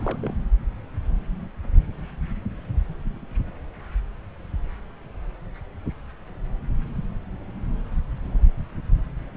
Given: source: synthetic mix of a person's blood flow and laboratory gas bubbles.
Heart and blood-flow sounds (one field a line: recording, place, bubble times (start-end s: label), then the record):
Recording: Doppler ultrasound of blood flow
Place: subclavian vein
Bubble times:
0.00-0.20 s: bubbles
0.23-0.33 s: bubbles
From the record:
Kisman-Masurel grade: 211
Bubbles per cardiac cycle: several, 3 to 8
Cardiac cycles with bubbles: 1 to 10%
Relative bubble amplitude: barely perceptible (0.100 to 0.250)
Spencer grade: 1 (occasional bubble signal discernible with the cardiac motion signal, with majority of cardiac periods free of bubbles)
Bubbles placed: anywhere in the cardiac cycle